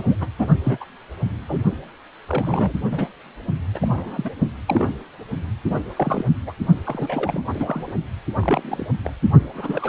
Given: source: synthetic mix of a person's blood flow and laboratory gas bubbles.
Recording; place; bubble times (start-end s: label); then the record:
Doppler ultrasound of blood flow; precordium
0.00-0.16 s: bubbles
0.20-0.27 s: bubbles
0.39-0.48 s: bubbles
0.63-0.85 s: bubbles
1.48-1.58 s: bubbles
2.27-2.74 s: bubbles
2.92-3.08 s: bubbles
3.74-4.30 s: bubbles
4.66-5.01 s: bubbles
5.65-5.80 s: bubbles
5.96-6.25 s: bubbles
6.46-6.53 s: bubbles
6.85-7.45 s: bubbles
7.53-7.93 s: bubbles
8.39-8.87 s: bubbles
9.04-9.13 s: bubbles
9.54-9.89 s: bubbles
From the record:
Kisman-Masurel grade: 232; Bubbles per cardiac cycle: several, 3 to 8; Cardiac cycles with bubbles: 50 to 99%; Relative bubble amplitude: moderate (0.250 to 0.450); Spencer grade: 3 (all of the cardiac periods contain showers or single bubble signals, but not dominating or overriding the cardiac motion signals); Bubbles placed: only in the low amplitude regions of the cardiac cycle